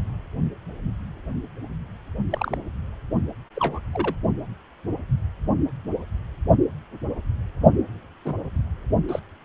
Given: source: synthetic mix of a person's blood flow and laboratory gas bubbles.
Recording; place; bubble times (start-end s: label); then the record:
Doppler ultrasound of blood flow; precordium
2.30-2.58 s: bubbles
3.56-3.79 s: bubbles
3.93-4.15 s: bubbles
8.25-8.33 s: bubbles
9.08-9.20 s: bubbles
From the record:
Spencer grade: 2 (many but less than half of the cardiac periods contain bubble signals, singularly or in groups); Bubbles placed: anywhere in the cardiac cycle